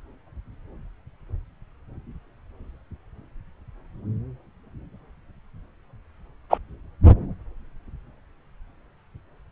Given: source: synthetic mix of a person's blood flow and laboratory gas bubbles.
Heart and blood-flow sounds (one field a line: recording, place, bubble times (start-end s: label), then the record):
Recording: Doppler ultrasound of blood flow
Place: subclavian vein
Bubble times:
6.50-6.58 s: bubbles
From the record:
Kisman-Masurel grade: 113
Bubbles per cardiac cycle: 1 to 2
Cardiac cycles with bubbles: 1 to 10%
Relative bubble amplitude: loud (0.450 to 0.775)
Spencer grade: 1 (occasional bubble signal discernible with the cardiac motion signal, with majority of cardiac periods free of bubbles)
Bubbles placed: anywhere in the cardiac cycle